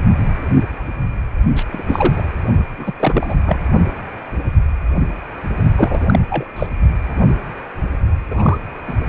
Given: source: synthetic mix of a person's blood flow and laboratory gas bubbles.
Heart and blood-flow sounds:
Doppler ultrasound of blood flow; precordium
1.56-1.63 s: bubbles
1.73-1.81 s: bubbles
1.88-2.22 s: bubbles
2.77-2.93 s: bubbles
3.00-3.35 s: bubbles
3.46-3.59 s: bubbles
5.75-6.19 s: bubbles
6.28-6.53 s: bubbles
6.56-6.67 s: bubbles
8.30-8.59 s: bubbles
8.87-8.93 s: bubbles
From the record:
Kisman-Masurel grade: 222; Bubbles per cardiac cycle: several, 3 to 8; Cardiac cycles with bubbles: 10 to 50%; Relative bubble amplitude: moderate (0.250 to 0.450); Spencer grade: 2 (many but less than half of the cardiac periods contain bubble signals, singularly or in groups); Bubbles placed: only in the low amplitude regions of the cardiac cycle

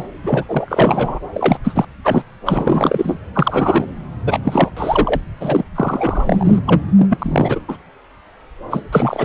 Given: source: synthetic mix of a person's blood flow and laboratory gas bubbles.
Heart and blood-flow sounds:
Doppler ultrasound of blood flow; subclavian vein
0.00-0.08 s: bubbles
0.23-0.45 s: bubbles
0.49-1.20 s: bubbles
1.32-1.57 s: bubbles
1.64-1.85 s: bubbles
2.04-2.22 s: bubbles
2.46-3.19 s: bubbles
3.34-3.87 s: bubbles
4.26-4.39 s: bubbles
4.44-4.71 s: bubbles
4.76-5.21 s: bubbles
5.40-5.63 s: bubbles
5.75-6.60 s: bubbles
6.66-6.81 s: bubbles
6.98-7.07 s: bubbles
7.09-7.59 s: bubbles
7.68-7.77 s: bubbles
8.71-8.82 s: bubbles
8.91-9.25 s: bubbles
From the record:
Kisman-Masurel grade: 333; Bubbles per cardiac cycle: rolling drumbeat, 9 or more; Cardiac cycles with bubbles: 50 to 99%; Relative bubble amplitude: loud (0.450 to 0.775); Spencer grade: 3 (all of the cardiac periods contain showers or single bubble signals, but not dominating or overriding the cardiac motion signals); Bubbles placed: anywhere in the cardiac cycle

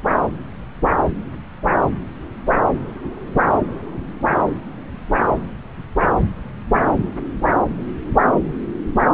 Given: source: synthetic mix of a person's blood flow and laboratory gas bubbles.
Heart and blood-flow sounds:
Doppler ultrasound of blood flow; subclavian vein
no bubbles
From the record:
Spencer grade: 0 (complete lack of bubble signals)

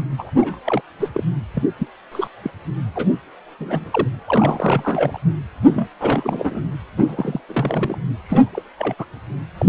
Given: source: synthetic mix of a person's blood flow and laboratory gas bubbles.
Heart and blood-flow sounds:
Doppler ultrasound of blood flow; precordium
0.18-0.31 s: bubbles
0.36-0.58 s: bubbles
0.65-0.81 s: bubbles
1.00-1.08 s: bubbles
1.14-1.24 s: bubbles
1.54-1.64 s: bubbles
1.78-1.87 s: bubbles
2.12-2.27 s: bubbles
2.44-2.50 s: bubbles
2.95-3.08 s: bubbles
3.58-4.08 s: bubbles
4.27-5.18 s: bubbles
5.65-5.88 s: bubbles
6.00-6.61 s: bubbles
6.97-7.40 s: bubbles
7.49-7.97 s: bubbles
8.24-8.62 s: bubbles
8.78-8.94 s: bubbles
8.98-9.05 s: bubbles
9.58-9.65 s: bubbles
From the record:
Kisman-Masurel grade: 242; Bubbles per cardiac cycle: several, 3 to 8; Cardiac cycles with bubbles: 100%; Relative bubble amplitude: moderate (0.250 to 0.450); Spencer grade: 3 (all of the cardiac periods contain showers or single bubble signals, but not dominating or overriding the cardiac motion signals); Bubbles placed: anywhere in the cardiac cycle

